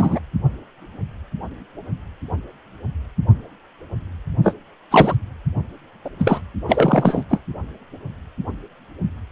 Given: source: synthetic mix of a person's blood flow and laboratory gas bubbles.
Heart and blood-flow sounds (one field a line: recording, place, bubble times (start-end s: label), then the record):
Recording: Doppler ultrasound of blood flow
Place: precordium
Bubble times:
0.00-0.20 s: bubbles
4.43-4.54 s: bubbles
4.90-5.15 s: bubbles
6.04-6.09 s: bubbles
6.18-6.41 s: bubbles
6.67-7.23 s: bubbles
7.29-7.40 s: bubbles
From the record:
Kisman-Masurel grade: 223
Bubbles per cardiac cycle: several, 3 to 8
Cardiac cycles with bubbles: 10 to 50%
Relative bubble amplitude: loud (0.450 to 0.775)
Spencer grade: 2 (many but less than half of the cardiac periods contain bubble signals, singularly or in groups)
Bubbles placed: anywhere in the cardiac cycle